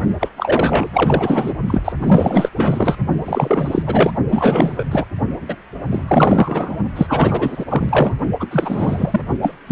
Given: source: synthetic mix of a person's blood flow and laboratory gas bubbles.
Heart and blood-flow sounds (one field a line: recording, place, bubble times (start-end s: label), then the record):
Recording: Doppler ultrasound of blood flow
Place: precordium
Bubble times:
0.20-0.29 s: bubbles
0.37-1.53 s: bubbles
1.67-1.92 s: bubbles
1.97-2.50 s: bubbles
2.56-2.96 s: bubbles
3.25-3.83 s: bubbles
3.86-4.11 s: bubbles
4.29-4.88 s: bubbles
4.91-5.05 s: bubbles
5.40-5.56 s: bubbles
5.90-6.04 s: bubbles
6.08-6.76 s: bubbles
6.96-7.65 s: bubbles
7.69-8.14 s: bubbles
8.39-8.47 s: bubbles
8.51-9.21 s: bubbles
9.42-9.53 s: bubbles
9.67-9.72 s: bubbles
From the record:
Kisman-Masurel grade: 444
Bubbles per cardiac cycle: continuous sound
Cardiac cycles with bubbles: 100%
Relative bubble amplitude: maximal (0.775 to 0.999)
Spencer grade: 4 (maximum detectable bubble signal sounding continuously throughout systole and diastole of every cardiac period, and overriding the amplitude of the normal cardiac signals)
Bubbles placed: only in the low amplitude regions of the cardiac cycle